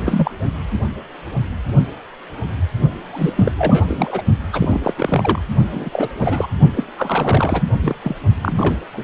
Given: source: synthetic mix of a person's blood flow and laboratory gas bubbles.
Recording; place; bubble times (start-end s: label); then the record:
Doppler ultrasound of blood flow; precordium
0.05-0.32 s: bubbles
3.12-3.33 s: bubbles
3.35-3.52 s: bubbles
3.58-4.22 s: bubbles
4.53-4.80 s: bubbles
4.83-4.93 s: bubbles
4.98-5.40 s: bubbles
5.71-6.08 s: bubbles
6.19-6.46 s: bubbles
6.75-6.84 s: bubbles
6.97-7.63 s: bubbles
7.82-7.95 s: bubbles
8.02-8.15 s: bubbles
8.36-8.76 s: bubbles
8.92-9.04 s: bubbles
From the record:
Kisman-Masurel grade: 332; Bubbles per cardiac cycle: rolling drumbeat, 9 or more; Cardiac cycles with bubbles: 50 to 99%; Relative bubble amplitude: moderate (0.250 to 0.450); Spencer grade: 3 (all of the cardiac periods contain showers or single bubble signals, but not dominating or overriding the cardiac motion signals); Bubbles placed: only in the low amplitude regions of the cardiac cycle